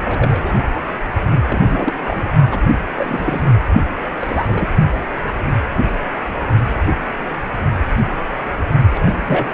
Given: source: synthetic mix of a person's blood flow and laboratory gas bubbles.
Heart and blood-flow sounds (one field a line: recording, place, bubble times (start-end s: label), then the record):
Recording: Doppler ultrasound of blood flow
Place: precordium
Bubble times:
0.05-0.53 s: bubbles
1.45-1.93 s: bubbles
2.08-2.28 s: bubbles
2.51-2.60 s: bubbles
2.69-2.79 s: bubbles
2.96-3.45 s: bubbles
4.20-4.67 s: bubbles
8.95-9.02 s: bubbles
9.05-9.53 s: bubbles
From the record:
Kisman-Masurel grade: 232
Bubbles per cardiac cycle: several, 3 to 8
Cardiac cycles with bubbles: 50 to 99%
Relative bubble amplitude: moderate (0.250 to 0.450)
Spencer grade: 3 (all of the cardiac periods contain showers or single bubble signals, but not dominating or overriding the cardiac motion signals)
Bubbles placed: only in the low amplitude regions of the cardiac cycle